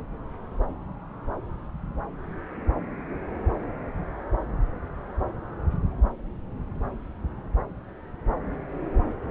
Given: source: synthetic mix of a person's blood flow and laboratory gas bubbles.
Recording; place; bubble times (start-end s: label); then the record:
Doppler ultrasound of blood flow; subclavian vein
no bubbles
From the record:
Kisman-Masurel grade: 000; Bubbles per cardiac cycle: 0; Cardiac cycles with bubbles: 0%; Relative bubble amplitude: no bubbles discernible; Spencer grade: 0 (complete lack of bubble signals)